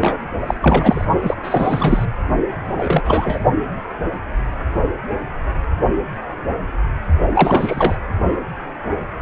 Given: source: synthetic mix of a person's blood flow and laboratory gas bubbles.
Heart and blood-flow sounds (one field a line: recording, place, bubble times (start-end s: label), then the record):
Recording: Doppler ultrasound of blood flow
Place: precordium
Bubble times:
0.01-0.17 s: bubbles
0.46-0.54 s: bubbles
0.62-1.05 s: bubbles
1.21-1.35 s: bubbles
1.43-2.06 s: bubbles
2.67-3.40 s: bubbles
7.34-7.96 s: bubbles
From the record:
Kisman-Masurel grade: 333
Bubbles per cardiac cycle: rolling drumbeat, 9 or more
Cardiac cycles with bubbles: 50 to 99%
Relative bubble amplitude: loud (0.450 to 0.775)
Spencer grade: 3 (all of the cardiac periods contain showers or single bubble signals, but not dominating or overriding the cardiac motion signals)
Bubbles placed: only in the low amplitude regions of the cardiac cycle